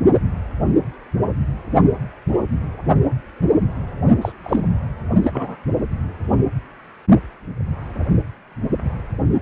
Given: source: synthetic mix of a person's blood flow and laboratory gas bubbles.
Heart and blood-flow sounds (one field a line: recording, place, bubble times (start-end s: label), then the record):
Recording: Doppler ultrasound of blood flow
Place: precordium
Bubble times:
4.22-4.32 s: bubbles
4.44-4.62 s: bubbles
5.23-5.58 s: bubbles
From the record:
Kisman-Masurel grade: 212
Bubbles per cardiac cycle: several, 3 to 8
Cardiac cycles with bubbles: 1 to 10%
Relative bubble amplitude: moderate (0.250 to 0.450)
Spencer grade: 1 (occasional bubble signal discernible with the cardiac motion signal, with majority of cardiac periods free of bubbles)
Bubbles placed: only in the low amplitude regions of the cardiac cycle